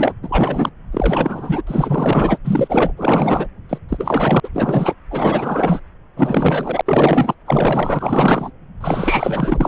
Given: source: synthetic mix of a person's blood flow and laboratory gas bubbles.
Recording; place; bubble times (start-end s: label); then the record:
Doppler ultrasound of blood flow; subclavian vein
0.00-0.14 s: bubbles
0.22-0.70 s: bubbles
0.92-1.62 s: bubbles
1.67-2.38 s: bubbles
2.44-2.92 s: bubbles
2.97-3.48 s: bubbles
3.69-3.78 s: bubbles
3.88-4.40 s: bubbles
4.43-4.50 s: bubbles
4.54-4.93 s: bubbles
5.11-5.80 s: bubbles
6.16-6.81 s: bubbles
6.86-7.34 s: bubbles
7.46-8.51 s: bubbles
8.80-9.68 s: bubbles
From the record:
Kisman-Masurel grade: 444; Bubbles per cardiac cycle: continuous sound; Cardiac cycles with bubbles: 100%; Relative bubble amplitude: maximal (0.775 to 0.999); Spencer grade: 4 (maximum detectable bubble signal sounding continuously throughout systole and diastole of every cardiac period, and overriding the amplitude of the normal cardiac signals); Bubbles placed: anywhere in the cardiac cycle